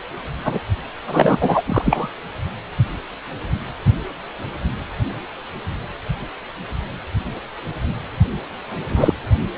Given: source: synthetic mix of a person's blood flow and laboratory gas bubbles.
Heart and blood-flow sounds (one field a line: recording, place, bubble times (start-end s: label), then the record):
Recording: Doppler ultrasound of blood flow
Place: precordium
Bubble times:
0.44-0.59 s: bubbles
0.98-1.62 s: bubbles
1.66-2.08 s: bubbles
8.89-9.14 s: bubbles
From the record:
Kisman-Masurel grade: 233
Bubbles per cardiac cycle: several, 3 to 8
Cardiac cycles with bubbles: 50 to 99%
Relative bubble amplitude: loud (0.450 to 0.775)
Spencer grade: 3 (all of the cardiac periods contain showers or single bubble signals, but not dominating or overriding the cardiac motion signals)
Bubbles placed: only in the low amplitude regions of the cardiac cycle